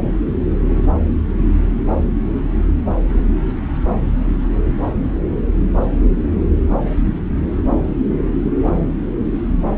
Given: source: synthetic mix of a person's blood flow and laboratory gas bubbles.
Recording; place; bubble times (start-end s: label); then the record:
Doppler ultrasound of blood flow; subclavian vein
no bubbles
From the record:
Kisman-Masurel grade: 000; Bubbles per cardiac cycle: 0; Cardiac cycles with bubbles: 0%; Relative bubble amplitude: no bubbles discernible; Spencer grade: 0 (complete lack of bubble signals)